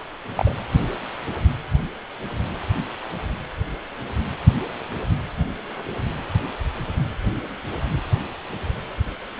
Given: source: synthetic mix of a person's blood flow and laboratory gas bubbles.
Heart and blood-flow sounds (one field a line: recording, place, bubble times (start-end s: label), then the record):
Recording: Doppler ultrasound of blood flow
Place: precordium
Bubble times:
0.36-0.54 s: bubbles
From the record:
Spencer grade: 1 (occasional bubble signal discernible with the cardiac motion signal, with majority of cardiac periods free of bubbles)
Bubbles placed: anywhere in the cardiac cycle